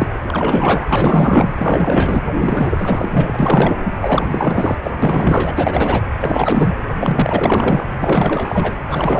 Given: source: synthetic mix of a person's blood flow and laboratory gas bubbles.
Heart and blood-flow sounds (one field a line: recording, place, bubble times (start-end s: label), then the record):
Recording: Doppler ultrasound of blood flow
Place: precordium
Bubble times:
0.00-0.08 s: bubbles
0.23-2.23 s: bubbles
2.40-3.08 s: bubbles
3.12-3.74 s: bubbles
4.00-4.76 s: bubbles
4.83-4.91 s: bubbles
5.02-6.02 s: bubbles
6.21-6.75 s: bubbles
6.99-7.85 s: bubbles
7.99-8.76 s: bubbles
8.80-8.82 s: bubbles
8.89-9.20 s: bubbles
From the record:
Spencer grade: 4 (maximum detectable bubble signal sounding continuously throughout systole and diastole of every cardiac period, and overriding the amplitude of the normal cardiac signals)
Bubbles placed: anywhere in the cardiac cycle